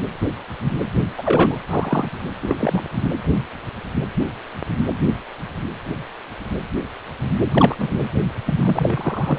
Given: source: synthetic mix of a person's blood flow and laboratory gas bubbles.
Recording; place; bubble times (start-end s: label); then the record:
Doppler ultrasound of blood flow; precordium
1.18-1.58 s: bubbles
1.69-2.08 s: bubbles
2.42-2.83 s: bubbles
7.51-7.75 s: bubbles
7.78-8.07 s: bubbles
8.45-8.53 s: bubbles
8.57-9.39 s: bubbles
From the record:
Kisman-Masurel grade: 222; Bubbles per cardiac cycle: several, 3 to 8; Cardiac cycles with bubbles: 10 to 50%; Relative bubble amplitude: moderate (0.250 to 0.450); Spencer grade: 2 (many but less than half of the cardiac periods contain bubble signals, singularly or in groups); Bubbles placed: anywhere in the cardiac cycle